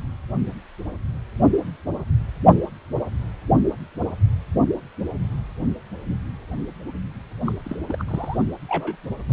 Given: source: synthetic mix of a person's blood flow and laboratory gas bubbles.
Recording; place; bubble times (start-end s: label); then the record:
Doppler ultrasound of blood flow; precordium
7.44-7.52 s: bubbles
7.64-7.76 s: bubbles
7.88-7.96 s: bubbles
7.99-8.03 s: bubbles
8.08-8.37 s: bubbles
8.69-8.96 s: bubbles
9.29-9.32 s: bubbles
From the record:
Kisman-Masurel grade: 221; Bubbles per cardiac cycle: several, 3 to 8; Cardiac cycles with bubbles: 10 to 50%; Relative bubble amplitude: barely perceptible (0.100 to 0.250); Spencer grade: 2 (many but less than half of the cardiac periods contain bubble signals, singularly or in groups); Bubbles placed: only in the low amplitude regions of the cardiac cycle